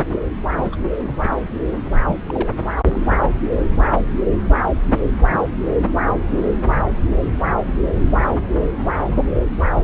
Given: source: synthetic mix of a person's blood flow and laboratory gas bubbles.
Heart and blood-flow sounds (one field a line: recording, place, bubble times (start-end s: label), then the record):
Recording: Doppler ultrasound of blood flow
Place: subclavian vein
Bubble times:
0.52-0.77 s: bubbles
2.07-2.17 s: bubbles
2.27-2.49 s: bubbles
2.86-3.01 s: bubbles
7.68-7.73 s: bubbles
From the record:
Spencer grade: 2 (many but less than half of the cardiac periods contain bubble signals, singularly or in groups)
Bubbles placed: anywhere in the cardiac cycle